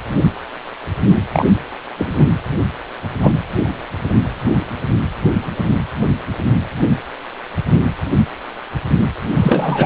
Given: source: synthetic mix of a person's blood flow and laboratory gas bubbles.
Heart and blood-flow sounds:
Doppler ultrasound of blood flow; precordium
1.33-1.46 s: bubbles
1.99-2.29 s: bubbles
3.22-3.33 s: bubbles
9.36-9.86 s: bubbles
From the record:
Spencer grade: 2 (many but less than half of the cardiac periods contain bubble signals, singularly or in groups); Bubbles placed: anywhere in the cardiac cycle

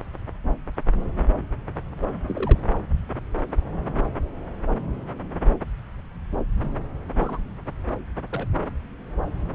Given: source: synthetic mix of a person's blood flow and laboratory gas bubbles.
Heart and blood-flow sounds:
Doppler ultrasound of blood flow; subclavian vein
2.26-2.60 s: bubbles
7.17-7.40 s: bubbles
8.29-8.46 s: bubbles
From the record:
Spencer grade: 2 (many but less than half of the cardiac periods contain bubble signals, singularly or in groups); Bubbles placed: anywhere in the cardiac cycle

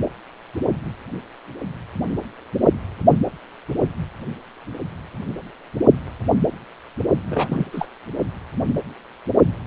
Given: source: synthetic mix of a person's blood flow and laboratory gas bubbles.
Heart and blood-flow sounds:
Doppler ultrasound of blood flow; precordium
7.30-7.67 s: bubbles
7.72-7.86 s: bubbles
From the record:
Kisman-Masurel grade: 212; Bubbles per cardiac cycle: several, 3 to 8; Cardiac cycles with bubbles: 1 to 10%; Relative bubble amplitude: moderate (0.250 to 0.450); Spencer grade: 1 (occasional bubble signal discernible with the cardiac motion signal, with majority of cardiac periods free of bubbles); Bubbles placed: only in the low amplitude regions of the cardiac cycle

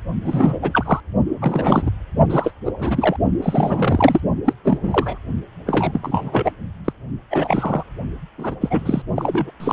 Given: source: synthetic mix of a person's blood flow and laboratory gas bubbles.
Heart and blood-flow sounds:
Doppler ultrasound of blood flow; precordium
0.24-0.59 s: bubbles
0.62-1.00 s: bubbles
1.40-1.91 s: bubbles
2.29-2.52 s: bubbles
2.65-2.71 s: bubbles
2.78-3.16 s: bubbles
3.42-4.21 s: bubbles
4.46-4.53 s: bubbles
4.64-5.18 s: bubbles
5.65-6.51 s: bubbles
6.84-6.92 s: bubbles
7.30-7.84 s: bubbles
8.38-8.55 s: bubbles
8.61-9.02 s: bubbles
9.16-9.51 s: bubbles
9.60-9.73 s: bubbles
From the record:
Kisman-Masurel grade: 342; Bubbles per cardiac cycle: rolling drumbeat, 9 or more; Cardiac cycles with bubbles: 100%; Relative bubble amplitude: moderate (0.250 to 0.450); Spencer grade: 3 (all of the cardiac periods contain showers or single bubble signals, but not dominating or overriding the cardiac motion signals); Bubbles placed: only in the low amplitude regions of the cardiac cycle

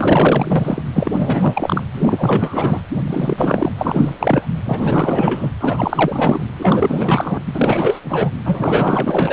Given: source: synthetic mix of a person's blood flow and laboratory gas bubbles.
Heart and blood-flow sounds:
Doppler ultrasound of blood flow; precordium
0.00-0.82 s: bubbles
0.93-1.83 s: bubbles
1.93-2.80 s: bubbles
3.07-3.71 s: bubbles
3.77-4.14 s: bubbles
4.19-4.50 s: bubbles
4.64-5.50 s: bubbles
5.60-6.46 s: bubbles
6.58-7.40 s: bubbles
7.46-8.00 s: bubbles
8.04-8.36 s: bubbles
8.45-9.33 s: bubbles
From the record:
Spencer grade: 4 (maximum detectable bubble signal sounding continuously throughout systole and diastole of every cardiac period, and overriding the amplitude of the normal cardiac signals); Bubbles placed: anywhere in the cardiac cycle

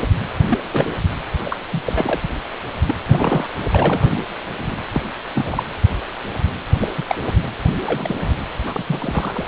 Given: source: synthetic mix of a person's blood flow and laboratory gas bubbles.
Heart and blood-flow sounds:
Doppler ultrasound of blood flow; precordium
0.02-0.07 s: bubbles
0.48-0.58 s: bubbles
0.72-0.92 s: bubbles
1.45-1.58 s: bubbles
1.72-1.82 s: bubbles
1.85-2.20 s: bubbles
2.86-2.95 s: bubbles
3.08-3.47 s: bubbles
3.71-4.24 s: bubbles
4.58-4.75 s: bubbles
4.93-5.02 s: bubbles
5.35-5.63 s: bubbles
6.81-6.88 s: bubbles
6.96-7.04 s: bubbles
7.07-7.16 s: bubbles
7.84-8.34 s: bubbles
8.66-8.83 s: bubbles
8.87-9.46 s: bubbles
From the record:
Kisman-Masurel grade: 242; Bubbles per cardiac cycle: several, 3 to 8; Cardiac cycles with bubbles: 100%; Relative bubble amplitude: moderate (0.250 to 0.450); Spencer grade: 3 (all of the cardiac periods contain showers or single bubble signals, but not dominating or overriding the cardiac motion signals); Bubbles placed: anywhere in the cardiac cycle

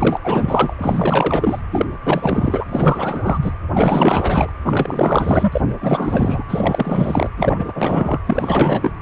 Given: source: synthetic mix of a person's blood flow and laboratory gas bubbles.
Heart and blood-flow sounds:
Doppler ultrasound of blood flow; precordium
0.00-0.20 s: bubbles
0.23-0.74 s: bubbles
0.78-1.61 s: bubbles
1.71-1.86 s: bubbles
2.04-2.64 s: bubbles
2.69-3.39 s: bubbles
3.42-3.52 s: bubbles
3.73-4.49 s: bubbles
4.64-5.73 s: bubbles
5.80-6.44 s: bubbles
6.48-7.29 s: bubbles
7.37-8.20 s: bubbles
8.25-8.92 s: bubbles
From the record:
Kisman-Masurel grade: 444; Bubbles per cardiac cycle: continuous sound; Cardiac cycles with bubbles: 100%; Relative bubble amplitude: maximal (0.775 to 0.999); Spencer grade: 4 (maximum detectable bubble signal sounding continuously throughout systole and diastole of every cardiac period, and overriding the amplitude of the normal cardiac signals); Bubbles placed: anywhere in the cardiac cycle

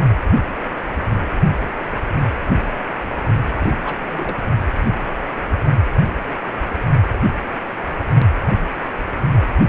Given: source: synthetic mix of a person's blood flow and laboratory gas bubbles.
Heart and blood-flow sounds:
Doppler ultrasound of blood flow; precordium
3.53-3.76 s: bubbles
3.83-4.01 s: bubbles
4.11-4.37 s: bubbles
From the record:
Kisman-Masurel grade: 211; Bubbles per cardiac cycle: several, 3 to 8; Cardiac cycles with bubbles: 1 to 10%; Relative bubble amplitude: barely perceptible (0.100 to 0.250); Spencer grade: 1 (occasional bubble signal discernible with the cardiac motion signal, with majority of cardiac periods free of bubbles); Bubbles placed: only in the low amplitude regions of the cardiac cycle

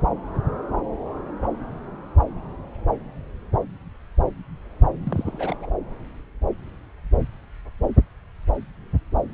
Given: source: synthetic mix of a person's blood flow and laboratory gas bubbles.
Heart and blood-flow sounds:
Doppler ultrasound of blood flow; subclavian vein
5.04-5.56 s: bubbles
5.59-5.70 s: bubbles
From the record:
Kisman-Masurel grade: 211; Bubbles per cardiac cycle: several, 3 to 8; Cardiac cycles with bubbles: 1 to 10%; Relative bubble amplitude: barely perceptible (0.100 to 0.250); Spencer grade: 1 (occasional bubble signal discernible with the cardiac motion signal, with majority of cardiac periods free of bubbles); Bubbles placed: anywhere in the cardiac cycle

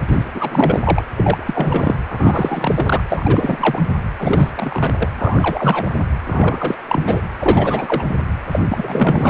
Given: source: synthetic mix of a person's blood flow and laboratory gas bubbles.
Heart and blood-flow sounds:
Doppler ultrasound of blood flow; precordium
0.07-0.24 s: bubbles
0.34-1.02 s: bubbles
1.17-1.99 s: bubbles
2.08-3.04 s: bubbles
3.08-3.88 s: bubbles
4.19-4.51 s: bubbles
4.54-4.94 s: bubbles
4.98-5.08 s: bubbles
5.14-6.04 s: bubbles
6.25-6.82 s: bubbles
6.88-7.21 s: bubbles
7.37-8.04 s: bubbles
8.09-8.15 s: bubbles
8.51-8.60 s: bubbles
8.69-9.30 s: bubbles
From the record:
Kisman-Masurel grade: 343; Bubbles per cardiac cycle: rolling drumbeat, 9 or more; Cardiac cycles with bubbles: 100%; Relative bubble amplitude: loud (0.450 to 0.775); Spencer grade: 3 (all of the cardiac periods contain showers or single bubble signals, but not dominating or overriding the cardiac motion signals); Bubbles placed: anywhere in the cardiac cycle

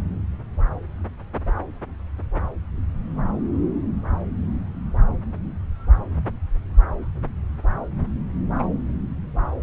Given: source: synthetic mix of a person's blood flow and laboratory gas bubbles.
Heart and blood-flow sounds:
Doppler ultrasound of blood flow; subclavian vein
8.58-8.68 s: bubbles
From the record:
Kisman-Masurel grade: 121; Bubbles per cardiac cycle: 1 to 2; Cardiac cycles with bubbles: 10 to 50%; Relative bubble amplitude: barely perceptible (0.100 to 0.250); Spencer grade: 2 (many but less than half of the cardiac periods contain bubble signals, singularly or in groups); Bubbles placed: anywhere in the cardiac cycle

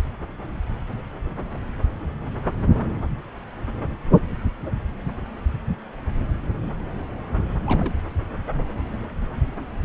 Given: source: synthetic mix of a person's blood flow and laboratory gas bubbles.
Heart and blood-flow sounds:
Doppler ultrasound of blood flow; subclavian vein
7.66-7.95 s: bubbles
From the record:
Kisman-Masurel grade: 111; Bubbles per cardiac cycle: 1 to 2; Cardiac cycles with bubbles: 1 to 10%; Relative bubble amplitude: barely perceptible (0.100 to 0.250); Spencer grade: 1 (occasional bubble signal discernible with the cardiac motion signal, with majority of cardiac periods free of bubbles); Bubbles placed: anywhere in the cardiac cycle

